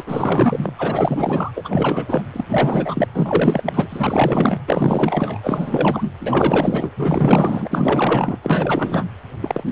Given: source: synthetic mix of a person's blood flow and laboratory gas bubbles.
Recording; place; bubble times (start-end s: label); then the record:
Doppler ultrasound of blood flow; precordium
0.00-0.72 s: bubbles
0.78-1.51 s: bubbles
1.54-2.23 s: bubbles
2.33-2.44 s: bubbles
2.48-3.08 s: bubbles
3.13-4.60 s: bubbles
4.66-5.40 s: bubbles
5.43-6.09 s: bubbles
6.20-6.93 s: bubbles
6.97-8.37 s: bubbles
8.42-9.06 s: bubbles
9.41-9.72 s: bubbles
From the record:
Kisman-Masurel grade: 444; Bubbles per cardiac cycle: continuous sound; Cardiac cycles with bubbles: 100%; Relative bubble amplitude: maximal (0.775 to 0.999); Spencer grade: 4 (maximum detectable bubble signal sounding continuously throughout systole and diastole of every cardiac period, and overriding the amplitude of the normal cardiac signals); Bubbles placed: anywhere in the cardiac cycle